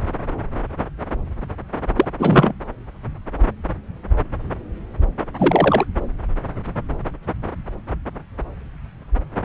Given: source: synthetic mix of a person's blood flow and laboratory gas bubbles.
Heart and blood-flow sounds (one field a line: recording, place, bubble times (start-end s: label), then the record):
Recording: Doppler ultrasound of blood flow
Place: subclavian vein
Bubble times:
1.96-2.06 s: bubbles
2.19-2.54 s: bubbles
5.38-5.85 s: bubbles
From the record:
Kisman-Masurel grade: 223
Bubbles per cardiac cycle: several, 3 to 8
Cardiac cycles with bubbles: 10 to 50%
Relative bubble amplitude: loud (0.450 to 0.775)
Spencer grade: 2 (many but less than half of the cardiac periods contain bubble signals, singularly or in groups)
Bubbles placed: anywhere in the cardiac cycle